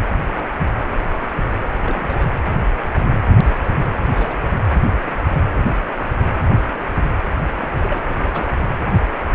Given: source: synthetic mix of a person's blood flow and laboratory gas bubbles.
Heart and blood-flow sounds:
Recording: Doppler ultrasound of blood flow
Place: precordium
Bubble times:
1.87-2.25 s: bubbles
4.12-4.36 s: bubbles
7.61-7.72 s: bubbles
7.82-8.00 s: bubbles
8.33-8.43 s: bubbles
From the record:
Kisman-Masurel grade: 121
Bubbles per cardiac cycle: 1 to 2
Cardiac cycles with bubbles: 10 to 50%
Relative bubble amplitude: barely perceptible (0.100 to 0.250)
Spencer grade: 2 (many but less than half of the cardiac periods contain bubble signals, singularly or in groups)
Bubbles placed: anywhere in the cardiac cycle

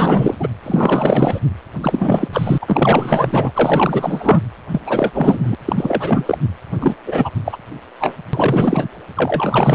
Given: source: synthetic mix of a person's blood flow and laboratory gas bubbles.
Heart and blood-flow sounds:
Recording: Doppler ultrasound of blood flow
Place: precordium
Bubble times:
0.00-0.35 s: bubbles
0.40-0.47 s: bubbles
0.62-1.40 s: bubbles
1.83-2.28 s: bubbles
2.32-2.58 s: bubbles
2.61-4.41 s: bubbles
4.72-4.81 s: bubbles
4.85-5.11 s: bubbles
5.14-5.55 s: bubbles
5.67-6.38 s: bubbles
6.79-6.95 s: bubbles
7.07-7.29 s: bubbles
7.45-7.57 s: bubbles
8.00-8.14 s: bubbles
8.33-8.88 s: bubbles
9.16-9.74 s: bubbles
From the record:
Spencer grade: 4 (maximum detectable bubble signal sounding continuously throughout systole and diastole of every cardiac period, and overriding the amplitude of the normal cardiac signals)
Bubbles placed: anywhere in the cardiac cycle

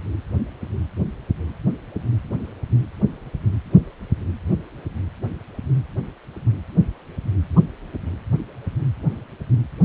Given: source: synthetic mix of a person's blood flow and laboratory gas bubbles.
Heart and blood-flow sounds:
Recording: Doppler ultrasound of blood flow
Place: precordium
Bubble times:
7.56-7.61 s: bubbles
From the record:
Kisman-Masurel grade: 112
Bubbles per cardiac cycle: 1 to 2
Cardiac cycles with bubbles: 1 to 10%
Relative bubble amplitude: moderate (0.250 to 0.450)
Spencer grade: 1 (occasional bubble signal discernible with the cardiac motion signal, with majority of cardiac periods free of bubbles)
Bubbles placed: anywhere in the cardiac cycle

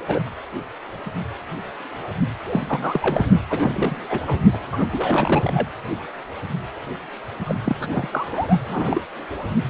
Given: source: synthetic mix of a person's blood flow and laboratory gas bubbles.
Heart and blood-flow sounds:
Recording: Doppler ultrasound of blood flow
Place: precordium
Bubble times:
0.08-0.20 s: bubbles
2.46-3.25 s: bubbles
3.50-4.01 s: bubbles
4.09-4.21 s: bubbles
4.26-4.40 s: bubbles
4.52-4.57 s: bubbles
4.72-4.87 s: bubbles
4.92-5.68 s: bubbles
7.45-8.59 s: bubbles
8.67-9.01 s: bubbles
From the record:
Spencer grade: 3 (all of the cardiac periods contain showers or single bubble signals, but not dominating or overriding the cardiac motion signals)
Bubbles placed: anywhere in the cardiac cycle

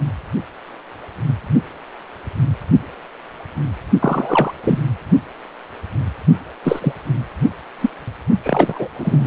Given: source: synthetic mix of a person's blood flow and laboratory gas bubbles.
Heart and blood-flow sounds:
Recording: Doppler ultrasound of blood flow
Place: precordium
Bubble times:
3.99-4.53 s: bubbles
4.63-4.79 s: bubbles
6.64-6.93 s: bubbles
7.81-7.90 s: bubbles
8.41-8.88 s: bubbles
8.96-9.27 s: bubbles
From the record:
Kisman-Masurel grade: 223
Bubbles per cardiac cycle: several, 3 to 8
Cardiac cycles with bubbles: 10 to 50%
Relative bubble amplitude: loud (0.450 to 0.775)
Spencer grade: 2 (many but less than half of the cardiac periods contain bubble signals, singularly or in groups)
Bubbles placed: only in the low amplitude regions of the cardiac cycle

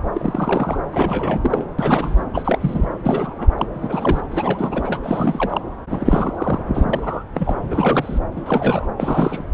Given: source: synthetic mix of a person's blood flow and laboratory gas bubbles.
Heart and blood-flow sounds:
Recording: Doppler ultrasound of blood flow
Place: subclavian vein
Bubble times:
0.14-0.79 s: bubbles
0.92-1.68 s: bubbles
1.79-2.25 s: bubbles
2.33-2.87 s: bubbles
3.04-3.48 s: bubbles
3.58-3.66 s: bubbles
3.73-4.21 s: bubbles
4.31-4.99 s: bubbles
5.03-5.61 s: bubbles
5.89-6.62 s: bubbles
6.74-6.85 s: bubbles
6.89-7.24 s: bubbles
7.34-7.57 s: bubbles
7.70-8.20 s: bubbles
8.36-8.42 s: bubbles
8.46-8.88 s: bubbles
8.97-9.43 s: bubbles
From the record:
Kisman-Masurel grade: 342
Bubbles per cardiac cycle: rolling drumbeat, 9 or more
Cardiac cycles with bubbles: 100%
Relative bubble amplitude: moderate (0.250 to 0.450)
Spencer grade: 3 (all of the cardiac periods contain showers or single bubble signals, but not dominating or overriding the cardiac motion signals)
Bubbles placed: anywhere in the cardiac cycle

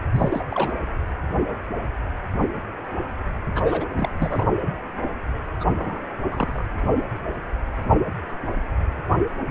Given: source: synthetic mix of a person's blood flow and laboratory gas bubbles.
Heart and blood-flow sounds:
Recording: Doppler ultrasound of blood flow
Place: precordium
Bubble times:
0.13-0.43 s: bubbles
0.49-0.72 s: bubbles
3.54-3.89 s: bubbles
3.97-4.09 s: bubbles
4.17-4.45 s: bubbles
5.60-5.65 s: bubbles
5.74-6.00 s: bubbles
6.31-6.64 s: bubbles
From the record:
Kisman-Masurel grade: 221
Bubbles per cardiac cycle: several, 3 to 8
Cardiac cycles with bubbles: 10 to 50%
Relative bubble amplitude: barely perceptible (0.100 to 0.250)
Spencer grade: 2 (many but less than half of the cardiac periods contain bubble signals, singularly or in groups)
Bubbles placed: anywhere in the cardiac cycle

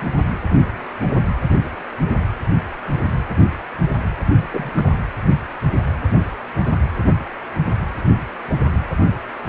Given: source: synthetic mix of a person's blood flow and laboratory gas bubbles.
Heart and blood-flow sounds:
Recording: Doppler ultrasound of blood flow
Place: precordium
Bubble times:
4.53-4.72 s: bubbles
4.77-4.92 s: bubbles
From the record:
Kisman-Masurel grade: 212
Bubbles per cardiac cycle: several, 3 to 8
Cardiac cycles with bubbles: 1 to 10%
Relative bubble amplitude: moderate (0.250 to 0.450)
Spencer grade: 1 (occasional bubble signal discernible with the cardiac motion signal, with majority of cardiac periods free of bubbles)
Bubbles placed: anywhere in the cardiac cycle

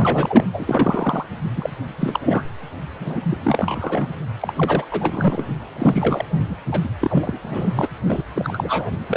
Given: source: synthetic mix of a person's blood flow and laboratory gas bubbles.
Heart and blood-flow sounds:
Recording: Doppler ultrasound of blood flow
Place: precordium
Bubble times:
0.00-0.47 s: bubbles
0.53-1.26 s: bubbles
1.56-1.70 s: bubbles
1.97-2.44 s: bubbles
3.00-3.18 s: bubbles
3.30-3.38 s: bubbles
3.43-4.08 s: bubbles
4.41-4.53 s: bubbles
4.55-4.85 s: bubbles
4.91-5.45 s: bubbles
5.75-6.25 s: bubbles
6.50-6.56 s: bubbles
6.71-6.79 s: bubbles
6.83-6.88 s: bubbles
7.00-7.39 s: bubbles
7.42-7.88 s: bubbles
8.08-8.22 s: bubbles
8.36-8.96 s: bubbles
9.07-9.17 s: bubbles
From the record:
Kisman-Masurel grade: 342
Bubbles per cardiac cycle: rolling drumbeat, 9 or more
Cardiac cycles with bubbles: 100%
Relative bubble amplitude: moderate (0.250 to 0.450)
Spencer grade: 3 (all of the cardiac periods contain showers or single bubble signals, but not dominating or overriding the cardiac motion signals)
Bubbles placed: anywhere in the cardiac cycle

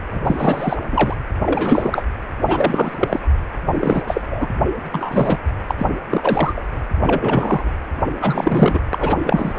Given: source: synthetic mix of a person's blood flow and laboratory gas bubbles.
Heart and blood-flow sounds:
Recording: Doppler ultrasound of blood flow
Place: precordium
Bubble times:
0.11-0.77 s: bubbles
0.90-1.15 s: bubbles
1.44-2.03 s: bubbles
2.41-3.20 s: bubbles
3.74-4.03 s: bubbles
4.07-4.21 s: bubbles
4.30-4.48 s: bubbles
4.92-5.38 s: bubbles
5.68-5.75 s: bubbles
5.78-5.87 s: bubbles
6.10-6.62 s: bubbles
7.02-7.71 s: bubbles
8.21-8.80 s: bubbles
8.93-9.18 s: bubbles
9.23-9.59 s: bubbles
From the record:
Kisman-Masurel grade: 333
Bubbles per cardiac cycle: rolling drumbeat, 9 or more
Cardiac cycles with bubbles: 50 to 99%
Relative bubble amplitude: loud (0.450 to 0.775)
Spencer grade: 3 (all of the cardiac periods contain showers or single bubble signals, but not dominating or overriding the cardiac motion signals)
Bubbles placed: anywhere in the cardiac cycle

